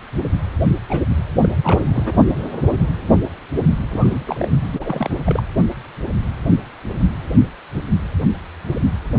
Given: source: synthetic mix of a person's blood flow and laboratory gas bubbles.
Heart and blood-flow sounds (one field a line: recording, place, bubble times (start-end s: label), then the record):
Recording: Doppler ultrasound of blood flow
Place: precordium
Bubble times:
0.89-1.03 s: bubbles
1.40-1.49 s: bubbles
1.62-2.25 s: bubbles
3.92-4.49 s: bubbles
4.71-5.18 s: bubbles
5.25-5.43 s: bubbles
From the record:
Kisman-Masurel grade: 222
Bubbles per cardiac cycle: several, 3 to 8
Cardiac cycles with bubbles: 10 to 50%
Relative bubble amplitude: moderate (0.250 to 0.450)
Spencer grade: 2 (many but less than half of the cardiac periods contain bubble signals, singularly or in groups)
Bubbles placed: anywhere in the cardiac cycle